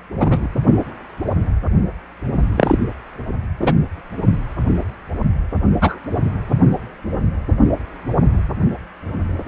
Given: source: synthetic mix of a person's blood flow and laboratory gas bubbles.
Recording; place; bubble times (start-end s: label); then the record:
Doppler ultrasound of blood flow; precordium
0.20-0.46 s: bubbles
2.57-2.77 s: bubbles
3.60-3.72 s: bubbles
5.81-5.98 s: bubbles
From the record:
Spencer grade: 2 (many but less than half of the cardiac periods contain bubble signals, singularly or in groups); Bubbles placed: only in the low amplitude regions of the cardiac cycle